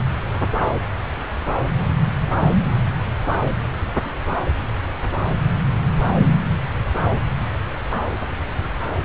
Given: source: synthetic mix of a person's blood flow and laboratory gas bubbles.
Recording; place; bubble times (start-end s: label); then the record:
Doppler ultrasound of blood flow; subclavian vein
no bubbles
From the record:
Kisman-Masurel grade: 000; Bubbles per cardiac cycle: 0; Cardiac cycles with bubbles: 0%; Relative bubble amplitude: no bubbles discernible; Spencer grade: 0 (complete lack of bubble signals)